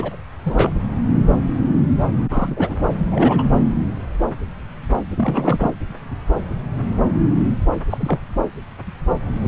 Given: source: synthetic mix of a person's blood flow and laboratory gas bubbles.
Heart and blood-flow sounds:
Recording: Doppler ultrasound of blood flow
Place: subclavian vein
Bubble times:
0.00-0.17 s: bubbles
0.45-0.73 s: bubbles
2.30-2.75 s: bubbles
3.11-3.50 s: bubbles
5.16-5.73 s: bubbles
7.89-8.19 s: bubbles
9.40-9.48 s: bubbles
From the record:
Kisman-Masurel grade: 232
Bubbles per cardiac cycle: several, 3 to 8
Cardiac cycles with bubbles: 50 to 99%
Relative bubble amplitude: moderate (0.250 to 0.450)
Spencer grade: 3 (all of the cardiac periods contain showers or single bubble signals, but not dominating or overriding the cardiac motion signals)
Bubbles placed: anywhere in the cardiac cycle

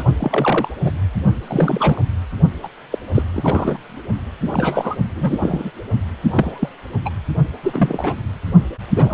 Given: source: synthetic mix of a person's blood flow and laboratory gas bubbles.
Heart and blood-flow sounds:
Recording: Doppler ultrasound of blood flow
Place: precordium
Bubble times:
0.00-0.04 s: bubbles
0.19-0.69 s: bubbles
0.84-0.92 s: bubbles
1.47-2.02 s: bubbles
2.63-2.68 s: bubbles
2.92-2.98 s: bubbles
3.15-3.22 s: bubbles
3.32-3.77 s: bubbles
4.42-4.95 s: bubbles
5.15-5.71 s: bubbles
6.22-6.70 s: bubbles
7.05-7.10 s: bubbles
7.62-8.15 s: bubbles
8.88-9.14 s: bubbles
From the record:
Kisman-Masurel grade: 242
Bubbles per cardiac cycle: several, 3 to 8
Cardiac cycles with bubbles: 100%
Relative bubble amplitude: moderate (0.250 to 0.450)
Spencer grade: 3 (all of the cardiac periods contain showers or single bubble signals, but not dominating or overriding the cardiac motion signals)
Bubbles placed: only in the low amplitude regions of the cardiac cycle

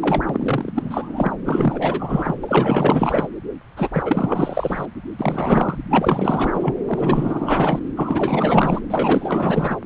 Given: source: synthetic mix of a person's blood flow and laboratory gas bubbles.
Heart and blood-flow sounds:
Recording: Doppler ultrasound of blood flow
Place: subclavian vein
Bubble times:
0.00-0.22 s: bubbles
0.26-1.31 s: bubbles
1.45-2.36 s: bubbles
2.43-3.28 s: bubbles
3.77-3.90 s: bubbles
3.93-4.86 s: bubbles
5.19-5.79 s: bubbles
5.90-6.74 s: bubbles
6.87-7.79 s: bubbles
7.96-8.81 s: bubbles
8.90-9.78 s: bubbles
From the record:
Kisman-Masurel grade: 444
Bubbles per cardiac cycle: continuous sound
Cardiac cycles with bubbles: 100%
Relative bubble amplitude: maximal (0.775 to 0.999)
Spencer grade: 4 (maximum detectable bubble signal sounding continuously throughout systole and diastole of every cardiac period, and overriding the amplitude of the normal cardiac signals)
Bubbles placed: anywhere in the cardiac cycle

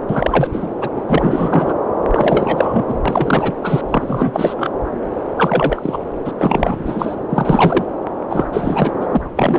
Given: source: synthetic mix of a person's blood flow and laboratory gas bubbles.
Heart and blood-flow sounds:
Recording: Doppler ultrasound of blood flow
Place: subclavian vein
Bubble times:
0.09-0.70 s: bubbles
0.81-0.90 s: bubbles
0.97-1.02 s: bubbles
1.08-1.73 s: bubbles
2.08-2.85 s: bubbles
2.88-2.98 s: bubbles
3.05-3.52 s: bubbles
3.63-3.81 s: bubbles
3.88-4.71 s: bubbles
5.37-5.98 s: bubbles
6.25-6.31 s: bubbles
6.38-7.16 s: bubbles
7.29-7.86 s: bubbles
8.29-8.46 s: bubbles
8.53-8.90 s: bubbles
9.00-9.07 s: bubbles
9.10-9.21 s: bubbles
9.36-9.58 s: bubbles
From the record:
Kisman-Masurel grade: 333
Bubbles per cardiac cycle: rolling drumbeat, 9 or more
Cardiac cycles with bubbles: 50 to 99%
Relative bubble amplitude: loud (0.450 to 0.775)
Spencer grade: 3 (all of the cardiac periods contain showers or single bubble signals, but not dominating or overriding the cardiac motion signals)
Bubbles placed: anywhere in the cardiac cycle

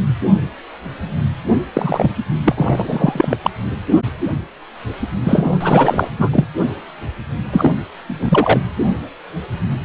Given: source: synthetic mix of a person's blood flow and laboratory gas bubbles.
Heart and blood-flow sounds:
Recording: Doppler ultrasound of blood flow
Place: precordium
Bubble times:
1.74-2.14 s: bubbles
2.44-3.35 s: bubbles
3.42-3.50 s: bubbles
5.24-5.58 s: bubbles
5.60-6.08 s: bubbles
6.18-6.45 s: bubbles
7.53-7.71 s: bubbles
8.08-8.60 s: bubbles
From the record:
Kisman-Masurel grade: 223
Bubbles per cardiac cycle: several, 3 to 8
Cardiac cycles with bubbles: 10 to 50%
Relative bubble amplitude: loud (0.450 to 0.775)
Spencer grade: 2 (many but less than half of the cardiac periods contain bubble signals, singularly or in groups)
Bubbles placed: anywhere in the cardiac cycle

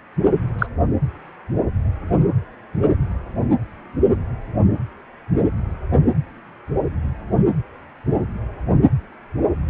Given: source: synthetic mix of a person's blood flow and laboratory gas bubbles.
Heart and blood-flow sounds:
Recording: Doppler ultrasound of blood flow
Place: precordium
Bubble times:
0.58-0.66 s: bubbles
From the record:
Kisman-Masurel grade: 113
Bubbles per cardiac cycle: 1 to 2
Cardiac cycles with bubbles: 1 to 10%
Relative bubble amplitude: loud (0.450 to 0.775)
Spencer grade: 1 (occasional bubble signal discernible with the cardiac motion signal, with majority of cardiac periods free of bubbles)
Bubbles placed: anywhere in the cardiac cycle

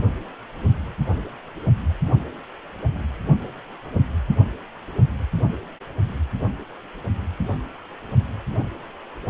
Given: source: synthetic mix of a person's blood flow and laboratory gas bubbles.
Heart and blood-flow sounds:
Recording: Doppler ultrasound of blood flow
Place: precordium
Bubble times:
no bubbles
From the record:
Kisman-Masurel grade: 000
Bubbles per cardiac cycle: 0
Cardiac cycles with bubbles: 0%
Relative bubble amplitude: no bubbles discernible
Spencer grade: 0 (complete lack of bubble signals)

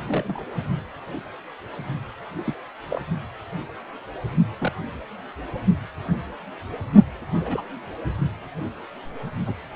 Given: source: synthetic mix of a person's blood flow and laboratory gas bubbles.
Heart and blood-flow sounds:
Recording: Doppler ultrasound of blood flow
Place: precordium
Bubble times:
0.00-0.46 s: bubbles
2.44-2.55 s: bubbles
2.90-3.01 s: bubbles
4.59-4.72 s: bubbles
7.40-7.62 s: bubbles
9.46-9.54 s: bubbles
From the record:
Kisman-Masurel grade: 121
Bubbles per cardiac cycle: 1 to 2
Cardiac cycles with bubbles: 10 to 50%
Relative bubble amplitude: barely perceptible (0.100 to 0.250)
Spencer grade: 2 (many but less than half of the cardiac periods contain bubble signals, singularly or in groups)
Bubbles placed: only in the low amplitude regions of the cardiac cycle

